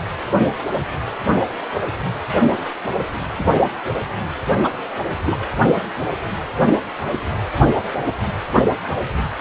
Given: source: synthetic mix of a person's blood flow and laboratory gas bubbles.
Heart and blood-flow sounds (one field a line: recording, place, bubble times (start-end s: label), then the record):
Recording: Doppler ultrasound of blood flow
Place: precordium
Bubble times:
4.63-4.70 s: bubbles
5.27-5.37 s: bubbles
From the record:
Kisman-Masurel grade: 213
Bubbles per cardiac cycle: several, 3 to 8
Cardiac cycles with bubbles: 1 to 10%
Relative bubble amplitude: loud (0.450 to 0.775)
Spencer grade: 1 (occasional bubble signal discernible with the cardiac motion signal, with majority of cardiac periods free of bubbles)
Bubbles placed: anywhere in the cardiac cycle